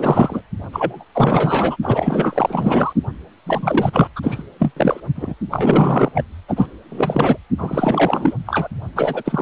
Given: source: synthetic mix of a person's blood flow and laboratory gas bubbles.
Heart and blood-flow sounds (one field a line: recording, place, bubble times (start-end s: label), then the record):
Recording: Doppler ultrasound of blood flow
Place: precordium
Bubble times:
0.00-0.41 s: bubbles
0.72-1.04 s: bubbles
1.14-1.76 s: bubbles
1.82-2.93 s: bubbles
3.46-3.90 s: bubbles
3.93-4.08 s: bubbles
4.15-4.43 s: bubbles
4.59-4.73 s: bubbles
4.76-5.00 s: bubbles
5.15-5.34 s: bubbles
5.51-6.11 s: bubbles
6.14-6.23 s: bubbles
6.48-6.67 s: bubbles
6.89-7.38 s: bubbles
7.57-8.34 s: bubbles
8.46-8.69 s: bubbles
8.96-9.42 s: bubbles
From the record:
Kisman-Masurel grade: 444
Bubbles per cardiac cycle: continuous sound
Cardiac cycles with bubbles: 100%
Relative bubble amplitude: maximal (0.775 to 0.999)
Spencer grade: 4 (maximum detectable bubble signal sounding continuously throughout systole and diastole of every cardiac period, and overriding the amplitude of the normal cardiac signals)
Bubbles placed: only in the low amplitude regions of the cardiac cycle